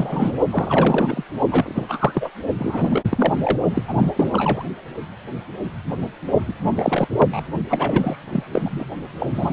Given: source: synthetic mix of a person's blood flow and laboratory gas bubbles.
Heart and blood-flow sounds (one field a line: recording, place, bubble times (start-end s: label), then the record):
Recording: Doppler ultrasound of blood flow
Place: precordium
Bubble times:
0.00-0.34 s: bubbles
0.51-1.24 s: bubbles
1.50-2.31 s: bubbles
2.58-3.03 s: bubbles
3.09-3.33 s: bubbles
3.43-3.58 s: bubbles
3.73-3.83 s: bubbles
3.88-4.10 s: bubbles
4.15-4.63 s: bubbles
6.47-6.53 s: bubbles
6.67-7.07 s: bubbles
7.19-7.41 s: bubbles
7.70-8.22 s: bubbles
8.32-8.44 s: bubbles
8.51-8.86 s: bubbles
9.20-9.26 s: bubbles
9.33-9.53 s: bubbles
From the record:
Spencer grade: 3 (all of the cardiac periods contain showers or single bubble signals, but not dominating or overriding the cardiac motion signals)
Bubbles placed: only in the low amplitude regions of the cardiac cycle